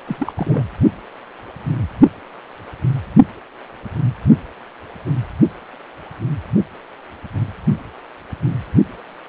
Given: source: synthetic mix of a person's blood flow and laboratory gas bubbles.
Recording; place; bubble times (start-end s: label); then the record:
Doppler ultrasound of blood flow; precordium
0.07-0.33 s: bubbles
0.36-0.62 s: bubbles
From the record:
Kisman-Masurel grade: 221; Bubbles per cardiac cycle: several, 3 to 8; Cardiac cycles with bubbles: 10 to 50%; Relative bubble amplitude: barely perceptible (0.100 to 0.250); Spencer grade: 2 (many but less than half of the cardiac periods contain bubble signals, singularly or in groups); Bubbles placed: only in the low amplitude regions of the cardiac cycle